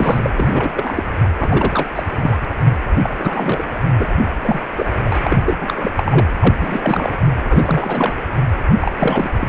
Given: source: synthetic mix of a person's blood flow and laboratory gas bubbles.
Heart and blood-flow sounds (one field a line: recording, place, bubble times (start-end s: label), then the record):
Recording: Doppler ultrasound of blood flow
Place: precordium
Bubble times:
0.00-0.72 s: bubbles
0.77-1.03 s: bubbles
1.39-1.86 s: bubbles
1.95-2.03 s: bubbles
2.22-2.38 s: bubbles
3.02-3.10 s: bubbles
3.18-3.79 s: bubbles
3.98-4.06 s: bubbles
4.17-4.25 s: bubbles
4.44-4.60 s: bubbles
4.76-4.85 s: bubbles
5.05-5.37 s: bubbles
5.46-5.57 s: bubbles
5.60-5.91 s: bubbles
5.96-6.27 s: bubbles
6.41-6.55 s: bubbles
6.60-7.25 s: bubbles
7.44-8.13 s: bubbles
8.81-8.92 s: bubbles
8.99-9.32 s: bubbles
9.41-9.48 s: bubbles
From the record:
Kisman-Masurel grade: 342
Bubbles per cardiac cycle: rolling drumbeat, 9 or more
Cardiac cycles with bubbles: 100%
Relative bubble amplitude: moderate (0.250 to 0.450)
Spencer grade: 3 (all of the cardiac periods contain showers or single bubble signals, but not dominating or overriding the cardiac motion signals)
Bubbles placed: anywhere in the cardiac cycle